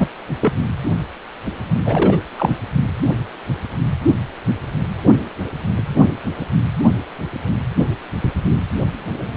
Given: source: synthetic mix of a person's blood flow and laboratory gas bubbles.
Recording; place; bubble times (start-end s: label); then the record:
Doppler ultrasound of blood flow; precordium
0.00-0.08 s: bubbles
0.40-0.53 s: bubbles
1.84-2.17 s: bubbles
2.38-2.57 s: bubbles
From the record:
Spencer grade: 2 (many but less than half of the cardiac periods contain bubble signals, singularly or in groups); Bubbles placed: anywhere in the cardiac cycle